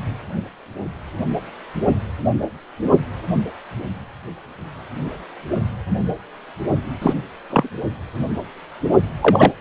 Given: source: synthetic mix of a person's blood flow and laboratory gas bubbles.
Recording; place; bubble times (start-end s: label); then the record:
Doppler ultrasound of blood flow; precordium
7.02-7.14 s: bubbles
7.50-7.70 s: bubbles
9.21-9.52 s: bubbles
From the record:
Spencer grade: 2 (many but less than half of the cardiac periods contain bubble signals, singularly or in groups); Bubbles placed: only in the low amplitude regions of the cardiac cycle